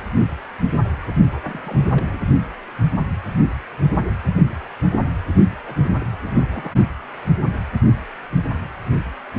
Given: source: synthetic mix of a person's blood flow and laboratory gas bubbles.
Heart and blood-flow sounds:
Doppler ultrasound of blood flow; precordium
1.32-2.21 s: bubbles
5.66-5.75 s: bubbles
5.83-5.91 s: bubbles
6.00-6.04 s: bubbles
6.23-6.74 s: bubbles
From the record:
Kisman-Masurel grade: 221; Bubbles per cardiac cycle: several, 3 to 8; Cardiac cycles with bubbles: 10 to 50%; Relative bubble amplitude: barely perceptible (0.100 to 0.250); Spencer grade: 2 (many but less than half of the cardiac periods contain bubble signals, singularly or in groups); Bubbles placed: only in the low amplitude regions of the cardiac cycle

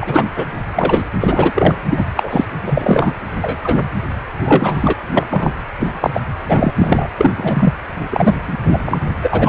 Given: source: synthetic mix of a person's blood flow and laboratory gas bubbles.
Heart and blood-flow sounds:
Doppler ultrasound of blood flow; precordium
0.00-0.25 s: bubbles
0.36-0.45 s: bubbles
0.75-1.03 s: bubbles
1.20-1.76 s: bubbles
1.89-2.05 s: bubbles
2.15-2.45 s: bubbles
2.67-3.11 s: bubbles
3.40-3.89 s: bubbles
4.45-4.93 s: bubbles
5.12-5.52 s: bubbles
5.80-5.95 s: bubbles
6.00-6.10 s: bubbles
6.13-6.23 s: bubbles
6.47-6.74 s: bubbles
6.78-7.08 s: bubbles
7.18-7.30 s: bubbles
7.37-7.72 s: bubbles
8.10-8.34 s: bubbles
8.47-8.58 s: bubbles
8.63-8.99 s: bubbles
9.22-9.49 s: bubbles
From the record:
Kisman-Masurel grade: 243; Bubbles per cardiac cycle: several, 3 to 8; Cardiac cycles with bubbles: 100%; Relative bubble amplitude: loud (0.450 to 0.775); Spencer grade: 3 (all of the cardiac periods contain showers or single bubble signals, but not dominating or overriding the cardiac motion signals); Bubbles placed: anywhere in the cardiac cycle

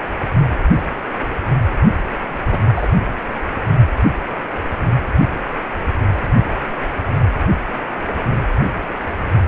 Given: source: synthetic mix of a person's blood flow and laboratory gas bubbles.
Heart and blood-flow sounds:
Doppler ultrasound of blood flow; precordium
2.51-2.58 s: bubbles
2.76-2.88 s: bubbles
From the record:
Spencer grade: 1 (occasional bubble signal discernible with the cardiac motion signal, with majority of cardiac periods free of bubbles); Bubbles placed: anywhere in the cardiac cycle

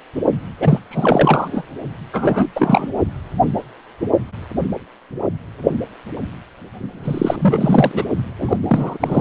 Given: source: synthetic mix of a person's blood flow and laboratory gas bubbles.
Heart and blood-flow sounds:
Doppler ultrasound of blood flow; precordium
0.60-0.79 s: bubbles
0.90-1.62 s: bubbles
2.12-2.48 s: bubbles
2.55-2.87 s: bubbles
7.04-8.04 s: bubbles
8.38-8.57 s: bubbles
8.62-8.97 s: bubbles
9.00-9.21 s: bubbles
From the record:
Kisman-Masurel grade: 333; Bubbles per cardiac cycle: rolling drumbeat, 9 or more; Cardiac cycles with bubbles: 50 to 99%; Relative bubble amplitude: loud (0.450 to 0.775); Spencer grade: 3 (all of the cardiac periods contain showers or single bubble signals, but not dominating or overriding the cardiac motion signals); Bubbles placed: only in the low amplitude regions of the cardiac cycle

